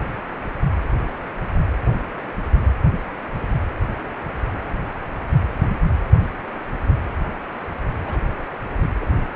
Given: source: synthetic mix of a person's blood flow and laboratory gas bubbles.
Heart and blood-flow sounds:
Doppler ultrasound of blood flow; precordium
8.06-8.18 s: bubbles
8.83-9.06 s: bubbles
From the record:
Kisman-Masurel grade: 111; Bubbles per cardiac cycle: 1 to 2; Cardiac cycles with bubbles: 1 to 10%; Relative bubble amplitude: barely perceptible (0.100 to 0.250); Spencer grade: 1 (occasional bubble signal discernible with the cardiac motion signal, with majority of cardiac periods free of bubbles); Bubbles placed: anywhere in the cardiac cycle

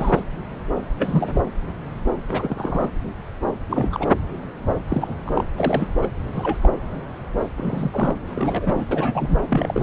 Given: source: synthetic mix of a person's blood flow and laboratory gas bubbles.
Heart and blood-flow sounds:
Doppler ultrasound of blood flow; subclavian vein
0.00-0.22 s: bubbles
0.99-1.42 s: bubbles
2.27-2.89 s: bubbles
3.70-4.08 s: bubbles
4.90-5.17 s: bubbles
5.24-5.44 s: bubbles
5.57-5.88 s: bubbles
6.02-6.08 s: bubbles
6.32-6.58 s: bubbles
6.61-6.69 s: bubbles
7.57-8.16 s: bubbles
8.23-8.85 s: bubbles
8.91-9.39 s: bubbles
9.48-9.83 s: bubbles
From the record:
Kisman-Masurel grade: 232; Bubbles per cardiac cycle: several, 3 to 8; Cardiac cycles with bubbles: 50 to 99%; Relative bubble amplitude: moderate (0.250 to 0.450); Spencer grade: 3 (all of the cardiac periods contain showers or single bubble signals, but not dominating or overriding the cardiac motion signals); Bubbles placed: anywhere in the cardiac cycle

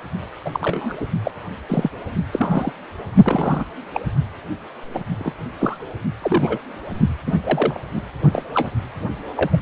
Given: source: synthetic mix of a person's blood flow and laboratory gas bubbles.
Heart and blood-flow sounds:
Doppler ultrasound of blood flow; precordium
0.45-0.96 s: bubbles
1.00-1.07 s: bubbles
1.24-1.31 s: bubbles
1.69-1.90 s: bubbles
2.32-2.72 s: bubbles
3.24-3.64 s: bubbles
3.94-4.01 s: bubbles
4.94-5.01 s: bubbles
5.19-5.32 s: bubbles
5.59-5.78 s: bubbles
6.21-6.58 s: bubbles
7.25-7.33 s: bubbles
7.44-7.80 s: bubbles
7.95-8.01 s: bubbles
8.33-8.44 s: bubbles
8.54-8.69 s: bubbles
9.37-9.57 s: bubbles
From the record:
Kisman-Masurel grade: 242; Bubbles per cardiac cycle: several, 3 to 8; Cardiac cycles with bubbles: 100%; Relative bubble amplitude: moderate (0.250 to 0.450); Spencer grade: 3 (all of the cardiac periods contain showers or single bubble signals, but not dominating or overriding the cardiac motion signals); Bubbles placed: only in the low amplitude regions of the cardiac cycle

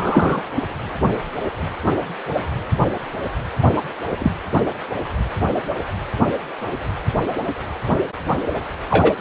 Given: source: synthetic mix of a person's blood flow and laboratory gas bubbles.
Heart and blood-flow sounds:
Doppler ultrasound of blood flow; precordium
0.00-0.41 s: bubbles
4.20-4.31 s: bubbles
8.90-9.13 s: bubbles
From the record:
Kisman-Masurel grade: 123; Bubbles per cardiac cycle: 1 to 2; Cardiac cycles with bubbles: 10 to 50%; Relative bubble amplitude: loud (0.450 to 0.775); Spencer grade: 2 (many but less than half of the cardiac periods contain bubble signals, singularly or in groups); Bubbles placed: anywhere in the cardiac cycle

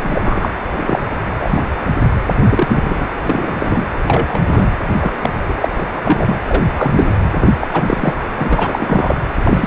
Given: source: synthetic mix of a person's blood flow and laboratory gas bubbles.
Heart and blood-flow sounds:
Doppler ultrasound of blood flow; precordium
0.04-0.51 s: bubbles
0.76-0.99 s: bubbles
1.35-1.62 s: bubbles
2.47-3.06 s: bubbles
3.23-3.55 s: bubbles
3.59-3.89 s: bubbles
4.06-4.68 s: bubbles
5.00-5.11 s: bubbles
5.23-5.29 s: bubbles
5.48-5.54 s: bubbles
5.61-5.69 s: bubbles
5.77-5.88 s: bubbles
6.04-6.37 s: bubbles
6.49-6.64 s: bubbles
6.75-7.15 s: bubbles
7.34-7.53 s: bubbles
7.61-7.68 s: bubbles
7.73-8.14 s: bubbles
8.38-9.15 s: bubbles
9.45-9.67 s: bubbles
From the record:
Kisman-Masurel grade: 243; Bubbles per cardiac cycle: several, 3 to 8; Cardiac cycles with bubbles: 100%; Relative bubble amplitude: loud (0.450 to 0.775); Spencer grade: 3 (all of the cardiac periods contain showers or single bubble signals, but not dominating or overriding the cardiac motion signals); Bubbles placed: anywhere in the cardiac cycle

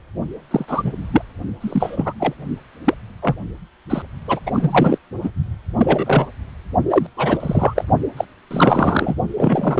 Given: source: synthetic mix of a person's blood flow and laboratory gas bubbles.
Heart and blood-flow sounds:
Doppler ultrasound of blood flow; precordium
0.51-0.65 s: bubbles
0.68-0.92 s: bubbles
1.11-1.22 s: bubbles
1.60-2.13 s: bubbles
2.19-2.33 s: bubbles
2.84-2.94 s: bubbles
3.22-3.36 s: bubbles
3.89-4.02 s: bubbles
4.28-4.40 s: bubbles
4.46-4.98 s: bubbles
5.21-5.31 s: bubbles
5.77-6.29 s: bubbles
6.90-7.07 s: bubbles
7.17-7.85 s: bubbles
8.17-8.25 s: bubbles
8.51-9.14 s: bubbles
9.37-9.80 s: bubbles
From the record:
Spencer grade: 3 (all of the cardiac periods contain showers or single bubble signals, but not dominating or overriding the cardiac motion signals); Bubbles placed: only in the low amplitude regions of the cardiac cycle

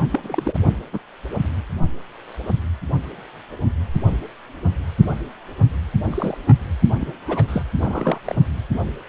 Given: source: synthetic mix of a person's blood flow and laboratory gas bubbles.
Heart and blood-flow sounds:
Doppler ultrasound of blood flow; precordium
0.00-0.03 s: bubbles
0.10-0.60 s: bubbles
0.92-0.98 s: bubbles
6.05-6.38 s: bubbles
6.46-6.56 s: bubbles
7.00-7.12 s: bubbles
7.27-7.63 s: bubbles
7.77-8.19 s: bubbles
8.25-8.35 s: bubbles
From the record:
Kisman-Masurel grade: 222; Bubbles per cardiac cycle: several, 3 to 8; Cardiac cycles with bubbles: 10 to 50%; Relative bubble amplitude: moderate (0.250 to 0.450); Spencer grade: 2 (many but less than half of the cardiac periods contain bubble signals, singularly or in groups); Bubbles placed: anywhere in the cardiac cycle

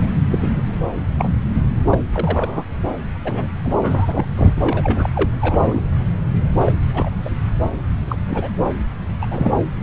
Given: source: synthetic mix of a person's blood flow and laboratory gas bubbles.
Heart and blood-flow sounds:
Doppler ultrasound of blood flow; subclavian vein
0.00-0.07 s: bubbles
0.31-0.84 s: bubbles
1.17-1.29 s: bubbles
1.90-1.98 s: bubbles
2.14-2.63 s: bubbles
3.24-3.52 s: bubbles
3.64-3.73 s: bubbles
3.82-4.26 s: bubbles
4.37-4.54 s: bubbles
4.56-5.10 s: bubbles
5.15-5.30 s: bubbles
5.41-5.84 s: bubbles
6.59-6.73 s: bubbles
6.94-7.10 s: bubbles
7.25-7.30 s: bubbles
8.08-8.16 s: bubbles
8.27-8.50 s: bubbles
9.21-9.26 s: bubbles
9.30-9.53 s: bubbles
From the record:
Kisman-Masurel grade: 232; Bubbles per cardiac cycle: several, 3 to 8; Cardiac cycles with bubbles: 50 to 99%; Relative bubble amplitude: moderate (0.250 to 0.450); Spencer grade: 3 (all of the cardiac periods contain showers or single bubble signals, but not dominating or overriding the cardiac motion signals); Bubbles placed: anywhere in the cardiac cycle

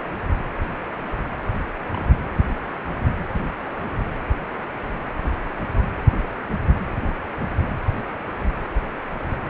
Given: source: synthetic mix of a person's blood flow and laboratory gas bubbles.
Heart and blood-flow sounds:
Doppler ultrasound of blood flow; precordium
1.93-2.06 s: bubbles
From the record:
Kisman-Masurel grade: 111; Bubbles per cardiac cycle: 1 to 2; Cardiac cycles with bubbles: 1 to 10%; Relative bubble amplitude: barely perceptible (0.100 to 0.250); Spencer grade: 1 (occasional bubble signal discernible with the cardiac motion signal, with majority of cardiac periods free of bubbles); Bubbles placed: anywhere in the cardiac cycle

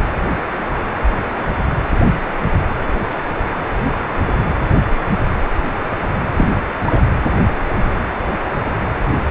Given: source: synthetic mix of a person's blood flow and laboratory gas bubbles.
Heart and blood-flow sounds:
Doppler ultrasound of blood flow; precordium
6.36-6.50 s: bubbles
6.85-7.01 s: bubbles
From the record:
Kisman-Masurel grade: 113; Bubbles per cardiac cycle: 1 to 2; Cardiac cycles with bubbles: 1 to 10%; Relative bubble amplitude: loud (0.450 to 0.775); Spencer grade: 1 (occasional bubble signal discernible with the cardiac motion signal, with majority of cardiac periods free of bubbles); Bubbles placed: anywhere in the cardiac cycle

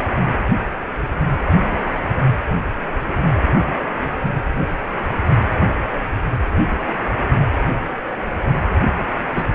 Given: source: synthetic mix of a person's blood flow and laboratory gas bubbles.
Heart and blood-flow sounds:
Doppler ultrasound of blood flow; precordium
9.36-9.43 s: bubbles
From the record:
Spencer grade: 2 (many but less than half of the cardiac periods contain bubble signals, singularly or in groups); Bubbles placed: anywhere in the cardiac cycle

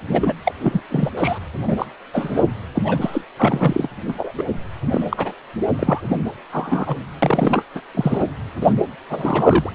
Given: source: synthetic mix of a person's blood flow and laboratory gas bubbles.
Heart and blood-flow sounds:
Doppler ultrasound of blood flow; precordium
0.09-0.34 s: bubbles
0.45-0.52 s: bubbles
0.60-0.82 s: bubbles
0.89-1.10 s: bubbles
1.17-1.39 s: bubbles
1.67-1.86 s: bubbles
2.13-2.44 s: bubbles
2.74-2.82 s: bubbles
2.85-3.24 s: bubbles
3.37-3.89 s: bubbles
4.08-4.14 s: bubbles
4.18-4.32 s: bubbles
4.38-4.45 s: bubbles
4.91-5.33 s: bubbles
5.79-6.01 s: bubbles
6.09-6.17 s: bubbles
6.52-7.03 s: bubbles
7.22-7.62 s: bubbles
7.75-7.82 s: bubbles
7.95-8.23 s: bubbles
8.61-8.73 s: bubbles
9.10-9.70 s: bubbles
From the record:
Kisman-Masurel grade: 232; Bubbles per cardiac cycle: several, 3 to 8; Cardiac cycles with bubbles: 50 to 99%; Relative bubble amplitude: moderate (0.250 to 0.450); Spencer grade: 3 (all of the cardiac periods contain showers or single bubble signals, but not dominating or overriding the cardiac motion signals); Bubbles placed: anywhere in the cardiac cycle

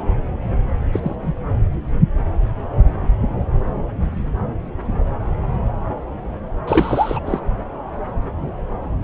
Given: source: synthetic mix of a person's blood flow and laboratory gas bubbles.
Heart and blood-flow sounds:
Doppler ultrasound of blood flow; subclavian vein
0.93-1.16 s: bubbles
1.22-1.32 s: bubbles
6.67-7.21 s: bubbles
7.25-7.40 s: bubbles
From the record:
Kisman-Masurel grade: 222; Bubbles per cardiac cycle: several, 3 to 8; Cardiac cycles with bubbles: 10 to 50%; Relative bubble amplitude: moderate (0.250 to 0.450); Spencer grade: 2 (many but less than half of the cardiac periods contain bubble signals, singularly or in groups); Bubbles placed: anywhere in the cardiac cycle

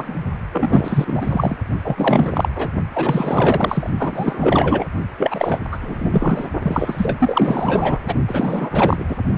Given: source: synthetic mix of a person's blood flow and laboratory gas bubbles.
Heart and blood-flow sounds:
Doppler ultrasound of blood flow; precordium
0.00-0.15 s: bubbles
0.52-1.56 s: bubbles
1.83-2.49 s: bubbles
2.55-2.69 s: bubbles
2.92-3.90 s: bubbles
3.97-4.86 s: bubbles
5.17-5.61 s: bubbles
5.71-5.78 s: bubbles
5.81-6.48 s: bubbles
6.62-7.99 s: bubbles
8.05-8.13 s: bubbles
8.27-9.06 s: bubbles
9.08-9.16 s: bubbles
From the record:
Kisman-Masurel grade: 444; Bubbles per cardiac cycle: continuous sound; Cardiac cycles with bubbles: 100%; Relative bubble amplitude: maximal (0.775 to 0.999); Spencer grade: 4 (maximum detectable bubble signal sounding continuously throughout systole and diastole of every cardiac period, and overriding the amplitude of the normal cardiac signals); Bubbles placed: only in the low amplitude regions of the cardiac cycle

